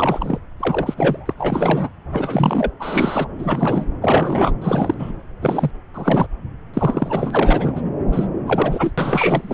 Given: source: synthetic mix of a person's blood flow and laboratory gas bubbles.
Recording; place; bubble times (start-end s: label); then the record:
Doppler ultrasound of blood flow; subclavian vein
0.00-0.39 s: bubbles
0.59-0.94 s: bubbles
0.97-1.34 s: bubbles
1.38-1.90 s: bubbles
2.12-2.71 s: bubbles
2.79-3.27 s: bubbles
3.39-3.84 s: bubbles
4.01-4.51 s: bubbles
4.61-5.12 s: bubbles
5.42-5.71 s: bubbles
5.93-6.27 s: bubbles
6.73-7.82 s: bubbles
8.12-8.27 s: bubbles
8.46-8.92 s: bubbles
8.97-9.54 s: bubbles
From the record:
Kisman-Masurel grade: 343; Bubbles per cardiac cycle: rolling drumbeat, 9 or more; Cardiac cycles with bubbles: 100%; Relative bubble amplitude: loud (0.450 to 0.775); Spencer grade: 3 (all of the cardiac periods contain showers or single bubble signals, but not dominating or overriding the cardiac motion signals); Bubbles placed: anywhere in the cardiac cycle